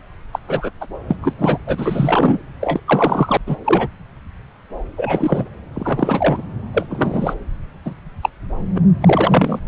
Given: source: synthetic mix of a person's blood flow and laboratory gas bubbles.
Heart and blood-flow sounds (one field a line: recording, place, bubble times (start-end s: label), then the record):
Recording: Doppler ultrasound of blood flow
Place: subclavian vein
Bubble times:
0.32-0.39 s: bubbles
0.47-0.70 s: bubbles
0.80-0.86 s: bubbles
1.07-1.16 s: bubbles
1.21-1.33 s: bubbles
1.38-1.58 s: bubbles
1.66-2.39 s: bubbles
2.61-2.80 s: bubbles
2.88-3.37 s: bubbles
3.46-3.55 s: bubbles
3.64-3.88 s: bubbles
4.96-5.49 s: bubbles
5.74-6.42 s: bubbles
6.73-6.86 s: bubbles
6.90-7.34 s: bubbles
7.85-7.94 s: bubbles
8.22-8.29 s: bubbles
8.75-8.78 s: bubbles
9.01-9.59 s: bubbles
From the record:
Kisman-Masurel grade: 233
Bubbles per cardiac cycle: several, 3 to 8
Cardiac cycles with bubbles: 50 to 99%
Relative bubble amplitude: loud (0.450 to 0.775)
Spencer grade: 3 (all of the cardiac periods contain showers or single bubble signals, but not dominating or overriding the cardiac motion signals)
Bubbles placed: anywhere in the cardiac cycle